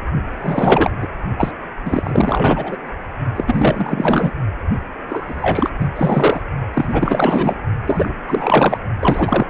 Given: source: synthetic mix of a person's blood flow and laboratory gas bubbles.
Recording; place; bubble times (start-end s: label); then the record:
Doppler ultrasound of blood flow; precordium
0.38-0.92 s: bubbles
1.01-1.08 s: bubbles
1.37-1.53 s: bubbles
1.85-2.77 s: bubbles
3.35-3.44 s: bubbles
3.47-4.32 s: bubbles
5.08-5.70 s: bubbles
5.79-5.88 s: bubbles
5.96-6.42 s: bubbles
6.74-7.54 s: bubbles
7.86-8.15 s: bubbles
8.28-8.78 s: bubbles
9.00-9.46 s: bubbles
From the record:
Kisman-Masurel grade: 444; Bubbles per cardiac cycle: continuous sound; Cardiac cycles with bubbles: 100%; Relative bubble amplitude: maximal (0.775 to 0.999); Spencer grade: 4 (maximum detectable bubble signal sounding continuously throughout systole and diastole of every cardiac period, and overriding the amplitude of the normal cardiac signals); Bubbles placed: only in the low amplitude regions of the cardiac cycle